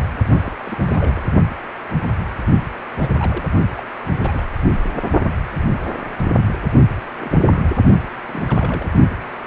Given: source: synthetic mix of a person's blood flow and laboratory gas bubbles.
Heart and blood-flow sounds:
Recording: Doppler ultrasound of blood flow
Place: precordium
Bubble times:
0.00-0.07 s: bubbles
0.27-0.53 s: bubbles
0.66-1.21 s: bubbles
2.99-3.14 s: bubbles
3.19-3.45 s: bubbles
3.75-3.82 s: bubbles
4.21-4.44 s: bubbles
7.18-7.81 s: bubbles
8.17-8.92 s: bubbles
From the record:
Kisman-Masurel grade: 221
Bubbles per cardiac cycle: several, 3 to 8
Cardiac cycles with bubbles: 10 to 50%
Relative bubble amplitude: barely perceptible (0.100 to 0.250)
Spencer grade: 2 (many but less than half of the cardiac periods contain bubble signals, singularly or in groups)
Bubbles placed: only in the low amplitude regions of the cardiac cycle

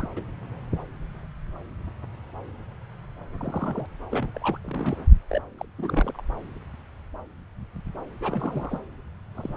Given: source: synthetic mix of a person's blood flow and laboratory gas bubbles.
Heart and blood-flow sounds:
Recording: Doppler ultrasound of blood flow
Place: subclavian vein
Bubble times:
0.00-0.08 s: bubbles
0.16-0.23 s: bubbles
3.38-3.97 s: bubbles
4.10-4.27 s: bubbles
4.34-4.39 s: bubbles
4.42-4.58 s: bubbles
4.62-4.97 s: bubbles
5.30-5.42 s: bubbles
5.58-5.66 s: bubbles
5.78-6.22 s: bubbles
8.21-8.80 s: bubbles
9.35-9.57 s: bubbles
From the record:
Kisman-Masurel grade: 221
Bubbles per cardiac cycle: several, 3 to 8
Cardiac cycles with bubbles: 10 to 50%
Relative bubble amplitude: barely perceptible (0.100 to 0.250)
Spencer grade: 2 (many but less than half of the cardiac periods contain bubble signals, singularly or in groups)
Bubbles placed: anywhere in the cardiac cycle

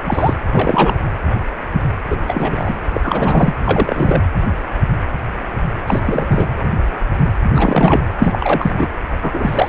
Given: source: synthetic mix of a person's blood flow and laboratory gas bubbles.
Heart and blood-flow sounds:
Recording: Doppler ultrasound of blood flow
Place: precordium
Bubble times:
0.00-0.34 s: bubbles
0.52-1.03 s: bubbles
2.10-2.80 s: bubbles
2.94-3.53 s: bubbles
3.65-4.24 s: bubbles
5.87-6.47 s: bubbles
7.54-8.03 s: bubbles
8.19-8.88 s: bubbles
9.21-9.69 s: bubbles
From the record:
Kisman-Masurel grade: 333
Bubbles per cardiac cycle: rolling drumbeat, 9 or more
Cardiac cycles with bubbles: 50 to 99%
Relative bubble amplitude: loud (0.450 to 0.775)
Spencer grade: 3 (all of the cardiac periods contain showers or single bubble signals, but not dominating or overriding the cardiac motion signals)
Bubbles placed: anywhere in the cardiac cycle

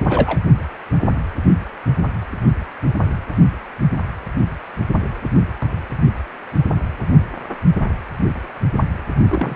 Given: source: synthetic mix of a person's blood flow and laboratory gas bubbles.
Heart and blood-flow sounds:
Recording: Doppler ultrasound of blood flow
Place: precordium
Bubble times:
0.05-0.40 s: bubbles
9.29-9.56 s: bubbles
From the record:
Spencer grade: 2 (many but less than half of the cardiac periods contain bubble signals, singularly or in groups)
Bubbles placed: only in the low amplitude regions of the cardiac cycle

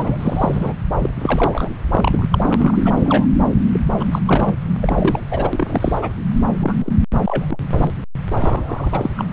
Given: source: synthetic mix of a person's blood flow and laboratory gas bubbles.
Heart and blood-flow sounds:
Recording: Doppler ultrasound of blood flow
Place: subclavian vein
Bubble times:
0.00-0.73 s: bubbles
1.02-1.09 s: bubbles
1.20-1.69 s: bubbles
1.92-2.27 s: bubbles
2.31-3.25 s: bubbles
3.72-3.79 s: bubbles
4.00-4.19 s: bubbles
4.27-4.55 s: bubbles
4.81-5.21 s: bubbles
5.30-5.50 s: bubbles
5.53-5.99 s: bubbles
6.01-6.12 s: bubbles
6.60-6.73 s: bubbles
6.78-6.93 s: bubbles
7.24-7.58 s: bubbles
7.77-7.93 s: bubbles
8.40-9.11 s: bubbles
9.17-9.25 s: bubbles
From the record:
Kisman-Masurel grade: 342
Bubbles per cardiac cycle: rolling drumbeat, 9 or more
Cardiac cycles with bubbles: 100%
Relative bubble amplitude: moderate (0.250 to 0.450)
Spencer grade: 3 (all of the cardiac periods contain showers or single bubble signals, but not dominating or overriding the cardiac motion signals)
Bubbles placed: anywhere in the cardiac cycle

